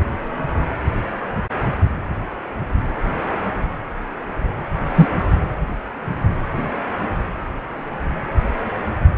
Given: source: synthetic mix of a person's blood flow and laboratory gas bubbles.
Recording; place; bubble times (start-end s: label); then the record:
Doppler ultrasound of blood flow; precordium
4.94-5.08 s: bubbles
From the record:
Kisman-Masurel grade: 113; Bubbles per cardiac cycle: 1 to 2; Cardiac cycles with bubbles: 1 to 10%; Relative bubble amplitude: loud (0.450 to 0.775); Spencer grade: 1 (occasional bubble signal discernible with the cardiac motion signal, with majority of cardiac periods free of bubbles); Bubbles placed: anywhere in the cardiac cycle